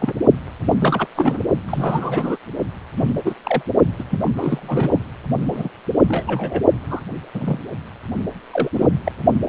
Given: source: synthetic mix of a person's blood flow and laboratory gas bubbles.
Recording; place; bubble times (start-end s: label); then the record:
Doppler ultrasound of blood flow; precordium
0.00-0.13 s: bubbles
0.59-0.74 s: bubbles
0.81-1.06 s: bubbles
1.15-1.43 s: bubbles
1.68-2.37 s: bubbles
2.97-3.14 s: bubbles
3.25-3.34 s: bubbles
3.45-3.62 s: bubbles
3.98-4.04 s: bubbles
4.10-4.99 s: bubbles
5.53-5.69 s: bubbles
6.08-6.62 s: bubbles
6.89-7.00 s: bubbles
7.33-7.59 s: bubbles
8.53-8.69 s: bubbles
8.73-8.88 s: bubbles
9.04-9.12 s: bubbles
From the record:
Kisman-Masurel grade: 242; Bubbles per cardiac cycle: several, 3 to 8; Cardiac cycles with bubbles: 100%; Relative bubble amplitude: moderate (0.250 to 0.450); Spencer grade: 3 (all of the cardiac periods contain showers or single bubble signals, but not dominating or overriding the cardiac motion signals); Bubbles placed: only in the low amplitude regions of the cardiac cycle